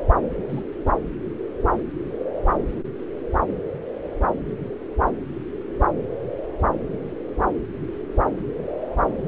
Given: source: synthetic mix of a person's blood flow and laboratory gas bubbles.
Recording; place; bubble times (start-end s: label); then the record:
Doppler ultrasound of blood flow; subclavian vein
0.48-0.63 s: bubbles
From the record:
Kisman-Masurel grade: 112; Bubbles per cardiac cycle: 1 to 2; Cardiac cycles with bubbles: 1 to 10%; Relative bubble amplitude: moderate (0.250 to 0.450); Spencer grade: 1 (occasional bubble signal discernible with the cardiac motion signal, with majority of cardiac periods free of bubbles); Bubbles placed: anywhere in the cardiac cycle